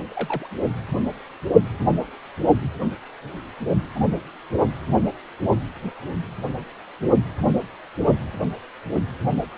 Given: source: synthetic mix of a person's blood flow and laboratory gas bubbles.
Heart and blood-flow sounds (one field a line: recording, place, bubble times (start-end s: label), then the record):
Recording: Doppler ultrasound of blood flow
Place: precordium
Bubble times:
0.11-0.47 s: bubbles
3.96-4.00 s: bubbles
From the record:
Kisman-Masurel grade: 121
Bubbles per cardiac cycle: 1 to 2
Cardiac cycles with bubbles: 10 to 50%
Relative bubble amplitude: barely perceptible (0.100 to 0.250)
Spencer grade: 2 (many but less than half of the cardiac periods contain bubble signals, singularly or in groups)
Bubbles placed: anywhere in the cardiac cycle